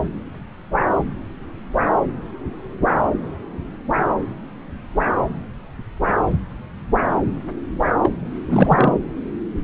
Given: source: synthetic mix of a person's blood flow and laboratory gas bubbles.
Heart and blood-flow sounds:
Doppler ultrasound of blood flow; subclavian vein
8.03-8.10 s: bubbles
8.48-8.95 s: bubbles
From the record:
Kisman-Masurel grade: 223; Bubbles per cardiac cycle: several, 3 to 8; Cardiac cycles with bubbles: 10 to 50%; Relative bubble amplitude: loud (0.450 to 0.775); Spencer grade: 2 (many but less than half of the cardiac periods contain bubble signals, singularly or in groups); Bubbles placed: anywhere in the cardiac cycle

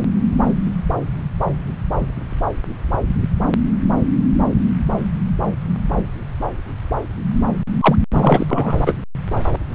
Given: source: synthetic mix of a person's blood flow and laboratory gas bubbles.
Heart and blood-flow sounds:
Doppler ultrasound of blood flow; subclavian vein
7.81-7.96 s: bubbles
8.13-8.77 s: bubbles
8.86-8.97 s: bubbles
From the record:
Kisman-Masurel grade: 213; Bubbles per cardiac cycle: several, 3 to 8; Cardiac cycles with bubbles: 1 to 10%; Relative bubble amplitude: loud (0.450 to 0.775); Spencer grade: 1 (occasional bubble signal discernible with the cardiac motion signal, with majority of cardiac periods free of bubbles); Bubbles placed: anywhere in the cardiac cycle

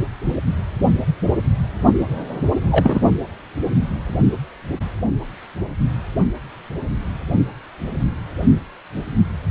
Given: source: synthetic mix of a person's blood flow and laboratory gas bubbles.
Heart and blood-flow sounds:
Doppler ultrasound of blood flow; precordium
2.71-3.02 s: bubbles
From the record:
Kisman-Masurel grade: 113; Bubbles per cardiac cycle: 1 to 2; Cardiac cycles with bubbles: 1 to 10%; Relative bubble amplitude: loud (0.450 to 0.775); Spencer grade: 1 (occasional bubble signal discernible with the cardiac motion signal, with majority of cardiac periods free of bubbles); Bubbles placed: only in the low amplitude regions of the cardiac cycle

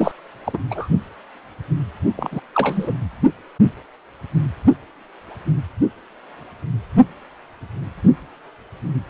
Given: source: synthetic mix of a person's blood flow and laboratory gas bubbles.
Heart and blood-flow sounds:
Doppler ultrasound of blood flow; precordium
0.00-0.11 s: bubbles
0.44-0.58 s: bubbles
0.71-0.88 s: bubbles
2.17-2.41 s: bubbles
2.54-2.95 s: bubbles
From the record:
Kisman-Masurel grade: 222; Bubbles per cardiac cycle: several, 3 to 8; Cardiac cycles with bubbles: 10 to 50%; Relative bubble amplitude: moderate (0.250 to 0.450); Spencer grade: 2 (many but less than half of the cardiac periods contain bubble signals, singularly or in groups); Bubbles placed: only in the low amplitude regions of the cardiac cycle

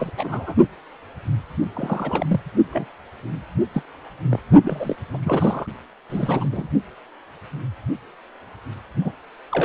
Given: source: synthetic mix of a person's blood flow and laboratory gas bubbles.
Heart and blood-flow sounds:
Doppler ultrasound of blood flow; precordium
0.00-0.10 s: bubbles
0.16-0.56 s: bubbles
1.75-2.26 s: bubbles
2.29-2.40 s: bubbles
2.72-2.86 s: bubbles
3.73-3.82 s: bubbles
4.30-4.40 s: bubbles
4.63-4.96 s: bubbles
5.14-5.18 s: bubbles
5.23-5.67 s: bubbles
6.10-6.69 s: bubbles
9.04-9.12 s: bubbles
9.51-9.65 s: bubbles
From the record:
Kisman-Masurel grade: 232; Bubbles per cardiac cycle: several, 3 to 8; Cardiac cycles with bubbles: 50 to 99%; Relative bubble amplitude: moderate (0.250 to 0.450); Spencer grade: 3 (all of the cardiac periods contain showers or single bubble signals, but not dominating or overriding the cardiac motion signals); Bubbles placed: only in the low amplitude regions of the cardiac cycle

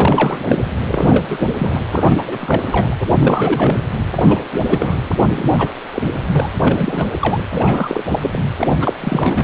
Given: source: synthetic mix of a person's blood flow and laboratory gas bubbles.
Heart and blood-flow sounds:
Doppler ultrasound of blood flow; precordium
0.00-0.57 s: bubbles
0.91-1.47 s: bubbles
1.58-1.81 s: bubbles
1.92-2.24 s: bubbles
2.26-2.96 s: bubbles
3.00-3.05 s: bubbles
3.19-3.82 s: bubbles
4.15-4.42 s: bubbles
4.52-4.59 s: bubbles
4.66-4.98 s: bubbles
5.35-5.70 s: bubbles
5.93-6.02 s: bubbles
6.23-6.48 s: bubbles
6.67-7.06 s: bubbles
7.20-7.38 s: bubbles
7.50-8.05 s: bubbles
8.10-8.39 s: bubbles
8.59-8.68 s: bubbles
8.80-8.95 s: bubbles
9.01-9.44 s: bubbles
From the record:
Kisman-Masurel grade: 343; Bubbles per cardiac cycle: rolling drumbeat, 9 or more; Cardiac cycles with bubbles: 100%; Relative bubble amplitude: loud (0.450 to 0.775); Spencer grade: 3 (all of the cardiac periods contain showers or single bubble signals, but not dominating or overriding the cardiac motion signals); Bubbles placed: anywhere in the cardiac cycle

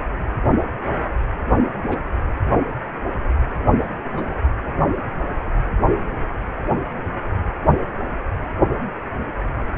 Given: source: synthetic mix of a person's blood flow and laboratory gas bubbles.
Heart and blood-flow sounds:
Doppler ultrasound of blood flow; precordium
1.91-1.99 s: bubbles
4.12-4.42 s: bubbles
From the record:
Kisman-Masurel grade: 121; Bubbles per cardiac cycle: 1 to 2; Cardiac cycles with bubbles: 10 to 50%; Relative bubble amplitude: barely perceptible (0.100 to 0.250); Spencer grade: 2 (many but less than half of the cardiac periods contain bubble signals, singularly or in groups); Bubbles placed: anywhere in the cardiac cycle

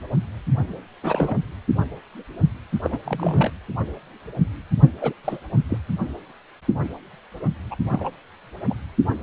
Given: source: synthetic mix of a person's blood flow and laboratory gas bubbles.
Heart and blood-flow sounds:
Doppler ultrasound of blood flow; precordium
1.02-1.37 s: bubbles
2.84-2.99 s: bubbles
3.05-3.52 s: bubbles
5.00-5.13 s: bubbles
5.24-5.40 s: bubbles
5.69-5.78 s: bubbles
7.71-7.75 s: bubbles
7.89-8.09 s: bubbles
8.69-8.74 s: bubbles
From the record:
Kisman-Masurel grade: 222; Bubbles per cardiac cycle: several, 3 to 8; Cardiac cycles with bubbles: 10 to 50%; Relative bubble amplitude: moderate (0.250 to 0.450); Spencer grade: 2 (many but less than half of the cardiac periods contain bubble signals, singularly or in groups); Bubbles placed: anywhere in the cardiac cycle

